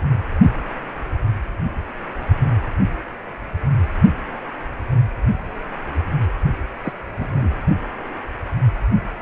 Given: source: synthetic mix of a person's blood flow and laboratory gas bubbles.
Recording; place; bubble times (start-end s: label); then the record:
Doppler ultrasound of blood flow; precordium
6.83-6.93 s: bubbles
7.17-7.54 s: bubbles
From the record:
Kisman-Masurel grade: 111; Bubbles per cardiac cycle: 1 to 2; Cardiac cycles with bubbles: 1 to 10%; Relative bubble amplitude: barely perceptible (0.100 to 0.250); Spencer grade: 1 (occasional bubble signal discernible with the cardiac motion signal, with majority of cardiac periods free of bubbles); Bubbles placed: anywhere in the cardiac cycle